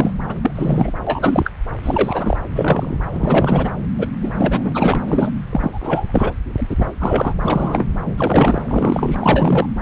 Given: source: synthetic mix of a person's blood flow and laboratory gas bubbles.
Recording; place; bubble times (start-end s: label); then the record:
Doppler ultrasound of blood flow; subclavian vein
0.00-0.11 s: bubbles
0.28-0.35 s: bubbles
0.42-0.52 s: bubbles
0.55-0.92 s: bubbles
1.06-1.51 s: bubbles
1.83-2.37 s: bubbles
2.55-2.98 s: bubbles
3.13-3.72 s: bubbles
3.99-4.08 s: bubbles
4.21-5.01 s: bubbles
5.07-5.32 s: bubbles
5.49-6.32 s: bubbles
6.58-6.67 s: bubbles
6.70-6.75 s: bubbles
6.79-6.86 s: bubbles
7.00-7.33 s: bubbles
7.45-7.89 s: bubbles
8.06-8.13 s: bubbles
8.17-8.62 s: bubbles
8.64-9.17 s: bubbles
9.21-9.69 s: bubbles
From the record:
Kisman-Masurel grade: 343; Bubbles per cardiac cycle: rolling drumbeat, 9 or more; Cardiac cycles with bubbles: 100%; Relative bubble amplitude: loud (0.450 to 0.775); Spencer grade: 3 (all of the cardiac periods contain showers or single bubble signals, but not dominating or overriding the cardiac motion signals); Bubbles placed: anywhere in the cardiac cycle